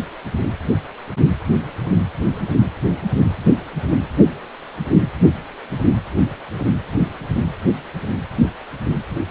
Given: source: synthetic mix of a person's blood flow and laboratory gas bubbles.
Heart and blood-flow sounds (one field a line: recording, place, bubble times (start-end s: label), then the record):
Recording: Doppler ultrasound of blood flow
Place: precordium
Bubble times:
no bubbles
From the record:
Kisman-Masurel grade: 000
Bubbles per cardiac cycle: 0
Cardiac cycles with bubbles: 0%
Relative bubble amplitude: no bubbles discernible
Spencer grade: 0 (complete lack of bubble signals)